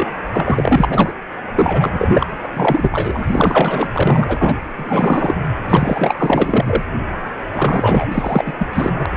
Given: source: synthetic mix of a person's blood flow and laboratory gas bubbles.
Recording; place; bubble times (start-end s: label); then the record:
Doppler ultrasound of blood flow; precordium
0.00-0.07 s: bubbles
0.31-1.14 s: bubbles
1.56-1.91 s: bubbles
1.93-2.26 s: bubbles
2.44-2.48 s: bubbles
2.53-3.88 s: bubbles
3.92-4.55 s: bubbles
4.77-5.35 s: bubbles
5.67-6.83 s: bubbles
7.54-8.06 s: bubbles
8.12-8.53 s: bubbles
8.58-8.67 s: bubbles
8.73-9.06 s: bubbles
From the record:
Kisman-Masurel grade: 444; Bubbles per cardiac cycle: continuous sound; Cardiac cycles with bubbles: 100%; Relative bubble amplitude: maximal (0.775 to 0.999); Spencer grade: 4 (maximum detectable bubble signal sounding continuously throughout systole and diastole of every cardiac period, and overriding the amplitude of the normal cardiac signals); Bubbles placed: anywhere in the cardiac cycle